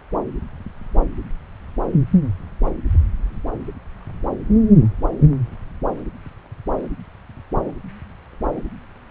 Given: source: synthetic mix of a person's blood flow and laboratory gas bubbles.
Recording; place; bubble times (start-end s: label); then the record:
Doppler ultrasound of blood flow; subclavian vein
no bubbles
From the record:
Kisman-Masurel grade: 000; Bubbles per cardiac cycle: 0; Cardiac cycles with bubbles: 0%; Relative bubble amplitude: no bubbles discernible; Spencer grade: 0 (complete lack of bubble signals)